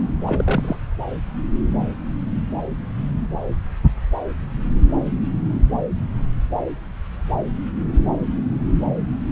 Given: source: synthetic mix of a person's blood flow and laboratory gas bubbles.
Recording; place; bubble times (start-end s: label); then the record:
Doppler ultrasound of blood flow; subclavian vein
0.21-0.76 s: bubbles
From the record:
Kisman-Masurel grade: 212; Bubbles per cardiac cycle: several, 3 to 8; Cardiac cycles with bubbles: 1 to 10%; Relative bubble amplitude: moderate (0.250 to 0.450); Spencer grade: 1 (occasional bubble signal discernible with the cardiac motion signal, with majority of cardiac periods free of bubbles); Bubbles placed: anywhere in the cardiac cycle